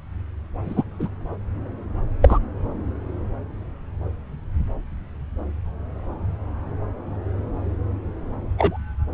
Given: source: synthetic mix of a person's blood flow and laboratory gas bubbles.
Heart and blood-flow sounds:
Doppler ultrasound of blood flow; subclavian vein
0.64-0.84 s: bubbles
0.99-1.08 s: bubbles
2.22-2.39 s: bubbles
8.57-8.78 s: bubbles
From the record:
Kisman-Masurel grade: 123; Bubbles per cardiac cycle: 1 to 2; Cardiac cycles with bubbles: 10 to 50%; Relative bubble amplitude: loud (0.450 to 0.775); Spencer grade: 2 (many but less than half of the cardiac periods contain bubble signals, singularly or in groups); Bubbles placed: anywhere in the cardiac cycle

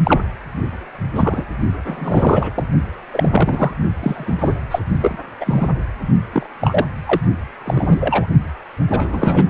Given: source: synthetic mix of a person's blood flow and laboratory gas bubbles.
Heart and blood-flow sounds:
Doppler ultrasound of blood flow; precordium
0.03-0.23 s: bubbles
1.15-1.47 s: bubbles
1.85-2.50 s: bubbles
2.55-2.65 s: bubbles
3.13-3.76 s: bubbles
4.00-4.35 s: bubbles
4.38-4.54 s: bubbles
4.71-4.79 s: bubbles
5.01-5.18 s: bubbles
5.40-5.67 s: bubbles
6.33-6.47 s: bubbles
6.60-6.86 s: bubbles
7.05-7.21 s: bubbles
7.66-8.26 s: bubbles
8.90-9.50 s: bubbles
From the record:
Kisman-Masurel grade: 243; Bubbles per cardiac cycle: several, 3 to 8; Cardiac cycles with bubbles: 100%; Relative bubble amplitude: loud (0.450 to 0.775); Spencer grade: 3 (all of the cardiac periods contain showers or single bubble signals, but not dominating or overriding the cardiac motion signals); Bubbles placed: only in the low amplitude regions of the cardiac cycle

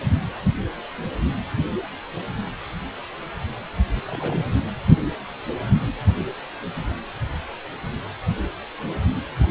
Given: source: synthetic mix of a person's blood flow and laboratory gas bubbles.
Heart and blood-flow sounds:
Doppler ultrasound of blood flow; precordium
4.06-4.45 s: bubbles
From the record:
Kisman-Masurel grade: 111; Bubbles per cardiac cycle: 1 to 2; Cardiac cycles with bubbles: 1 to 10%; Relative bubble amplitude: barely perceptible (0.100 to 0.250); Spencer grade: 1 (occasional bubble signal discernible with the cardiac motion signal, with majority of cardiac periods free of bubbles); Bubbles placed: anywhere in the cardiac cycle

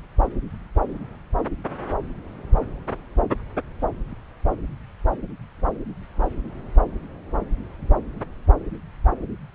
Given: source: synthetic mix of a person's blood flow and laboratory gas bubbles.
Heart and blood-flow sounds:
Doppler ultrasound of blood flow; subclavian vein
no bubbles
From the record:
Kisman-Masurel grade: 000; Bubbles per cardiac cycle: 0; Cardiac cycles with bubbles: 0%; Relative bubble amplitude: no bubbles discernible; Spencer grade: 0 (complete lack of bubble signals)

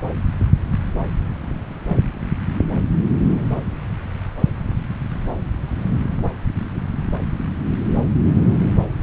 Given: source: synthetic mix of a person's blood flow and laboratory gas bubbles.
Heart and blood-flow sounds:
Doppler ultrasound of blood flow; subclavian vein
no bubbles
From the record:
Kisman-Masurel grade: 000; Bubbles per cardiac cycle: 0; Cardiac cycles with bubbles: 0%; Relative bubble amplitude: no bubbles discernible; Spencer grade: 0 (complete lack of bubble signals)

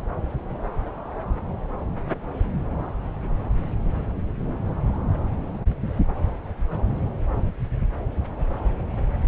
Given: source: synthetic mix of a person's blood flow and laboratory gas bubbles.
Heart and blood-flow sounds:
Doppler ultrasound of blood flow; subclavian vein
no bubbles
From the record:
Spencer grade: 0 (complete lack of bubble signals)

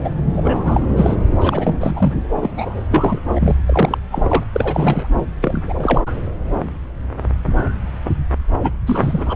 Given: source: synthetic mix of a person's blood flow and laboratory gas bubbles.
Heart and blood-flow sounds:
Doppler ultrasound of blood flow; subclavian vein
0.03-0.09 s: bubbles
0.36-0.82 s: bubbles
0.96-1.16 s: bubbles
1.40-1.76 s: bubbles
1.79-2.14 s: bubbles
2.35-2.50 s: bubbles
2.56-2.81 s: bubbles
2.90-3.21 s: bubbles
3.35-3.56 s: bubbles
3.66-3.98 s: bubbles
4.11-4.44 s: bubbles
4.53-5.08 s: bubbles
5.41-5.62 s: bubbles
5.67-6.02 s: bubbles
6.07-6.12 s: bubbles
8.60-8.71 s: bubbles
8.86-9.35 s: bubbles
From the record:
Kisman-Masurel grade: 332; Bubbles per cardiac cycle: rolling drumbeat, 9 or more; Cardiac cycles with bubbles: 50 to 99%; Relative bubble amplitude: moderate (0.250 to 0.450); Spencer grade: 3 (all of the cardiac periods contain showers or single bubble signals, but not dominating or overriding the cardiac motion signals); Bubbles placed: anywhere in the cardiac cycle

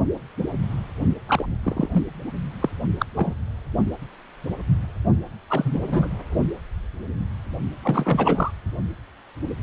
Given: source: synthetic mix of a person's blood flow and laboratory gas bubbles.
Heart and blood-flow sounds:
Doppler ultrasound of blood flow; precordium
1.28-1.46 s: bubbles
1.63-1.89 s: bubbles
1.93-2.04 s: bubbles
2.60-2.69 s: bubbles
2.99-3.05 s: bubbles
3.16-3.34 s: bubbles
5.50-6.09 s: bubbles
7.83-8.51 s: bubbles
From the record:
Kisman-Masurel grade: 222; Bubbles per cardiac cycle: several, 3 to 8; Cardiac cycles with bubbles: 10 to 50%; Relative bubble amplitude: moderate (0.250 to 0.450); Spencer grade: 2 (many but less than half of the cardiac periods contain bubble signals, singularly or in groups); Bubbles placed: only in the low amplitude regions of the cardiac cycle

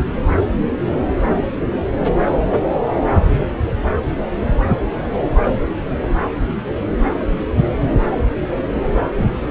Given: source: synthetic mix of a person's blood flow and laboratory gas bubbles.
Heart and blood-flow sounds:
Doppler ultrasound of blood flow; subclavian vein
no bubbles
From the record:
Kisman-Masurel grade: 000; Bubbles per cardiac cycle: 0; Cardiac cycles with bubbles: 0%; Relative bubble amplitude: no bubbles discernible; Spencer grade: 0 (complete lack of bubble signals)

